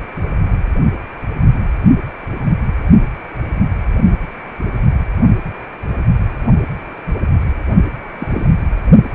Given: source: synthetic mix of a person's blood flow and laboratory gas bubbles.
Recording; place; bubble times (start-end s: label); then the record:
Doppler ultrasound of blood flow; precordium
8.19-8.53 s: bubbles
From the record:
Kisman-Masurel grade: 112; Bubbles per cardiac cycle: 1 to 2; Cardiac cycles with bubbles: 1 to 10%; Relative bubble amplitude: moderate (0.250 to 0.450); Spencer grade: 1 (occasional bubble signal discernible with the cardiac motion signal, with majority of cardiac periods free of bubbles); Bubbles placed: only in the low amplitude regions of the cardiac cycle